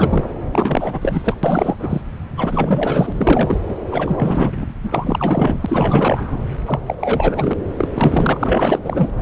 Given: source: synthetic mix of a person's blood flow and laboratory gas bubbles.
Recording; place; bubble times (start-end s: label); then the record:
Doppler ultrasound of blood flow; subclavian vein
0.00-0.25 s: bubbles
0.52-1.34 s: bubbles
1.43-1.75 s: bubbles
1.79-2.02 s: bubbles
2.37-3.12 s: bubbles
3.15-3.59 s: bubbles
3.68-3.74 s: bubbles
3.91-4.66 s: bubbles
4.82-6.38 s: bubbles
6.66-6.79 s: bubbles
6.86-7.54 s: bubbles
7.78-7.88 s: bubbles
7.94-8.79 s: bubbles
8.84-9.12 s: bubbles
9.18-9.22 s: bubbles
From the record:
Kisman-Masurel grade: 444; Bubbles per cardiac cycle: continuous sound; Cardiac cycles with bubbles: 100%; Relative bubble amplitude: maximal (0.775 to 0.999); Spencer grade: 4 (maximum detectable bubble signal sounding continuously throughout systole and diastole of every cardiac period, and overriding the amplitude of the normal cardiac signals); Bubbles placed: anywhere in the cardiac cycle